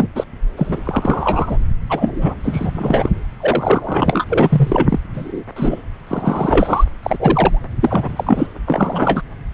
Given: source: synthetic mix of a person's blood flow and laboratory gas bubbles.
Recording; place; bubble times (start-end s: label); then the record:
Doppler ultrasound of blood flow; subclavian vein
0.00-0.09 s: bubbles
0.15-0.24 s: bubbles
0.57-0.81 s: bubbles
0.85-1.57 s: bubbles
1.89-2.35 s: bubbles
2.44-2.71 s: bubbles
2.74-3.10 s: bubbles
3.40-4.25 s: bubbles
4.29-5.00 s: bubbles
5.15-5.44 s: bubbles
5.56-5.83 s: bubbles
6.08-6.85 s: bubbles
7.03-7.62 s: bubbles
7.81-8.47 s: bubbles
8.66-9.22 s: bubbles
From the record:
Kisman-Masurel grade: 243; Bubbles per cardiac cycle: several, 3 to 8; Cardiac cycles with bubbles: 100%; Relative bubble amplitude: loud (0.450 to 0.775); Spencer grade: 3 (all of the cardiac periods contain showers or single bubble signals, but not dominating or overriding the cardiac motion signals); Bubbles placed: anywhere in the cardiac cycle